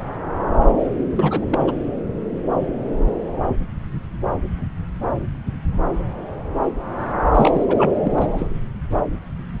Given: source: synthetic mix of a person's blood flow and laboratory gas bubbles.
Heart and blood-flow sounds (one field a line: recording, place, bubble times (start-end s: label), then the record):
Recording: Doppler ultrasound of blood flow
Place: subclavian vein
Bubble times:
1.16-1.46 s: bubbles
1.51-1.71 s: bubbles
7.34-7.66 s: bubbles
7.68-7.91 s: bubbles
8.03-8.48 s: bubbles
From the record:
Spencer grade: 2 (many but less than half of the cardiac periods contain bubble signals, singularly or in groups)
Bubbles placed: anywhere in the cardiac cycle